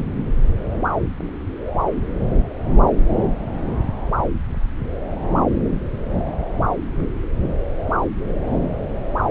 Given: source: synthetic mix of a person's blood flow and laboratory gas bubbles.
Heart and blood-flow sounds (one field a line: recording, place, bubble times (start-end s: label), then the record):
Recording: Doppler ultrasound of blood flow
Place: subclavian vein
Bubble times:
no bubbles
From the record:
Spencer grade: 0 (complete lack of bubble signals)